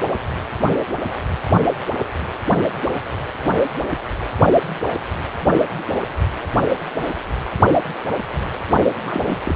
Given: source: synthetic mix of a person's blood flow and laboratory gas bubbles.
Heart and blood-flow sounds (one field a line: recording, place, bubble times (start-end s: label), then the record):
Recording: Doppler ultrasound of blood flow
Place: precordium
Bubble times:
9.04-9.38 s: bubbles
9.45-9.56 s: bubbles
From the record:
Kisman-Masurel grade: 212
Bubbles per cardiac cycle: several, 3 to 8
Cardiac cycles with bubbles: 1 to 10%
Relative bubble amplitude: moderate (0.250 to 0.450)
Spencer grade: 1 (occasional bubble signal discernible with the cardiac motion signal, with majority of cardiac periods free of bubbles)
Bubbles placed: only in the low amplitude regions of the cardiac cycle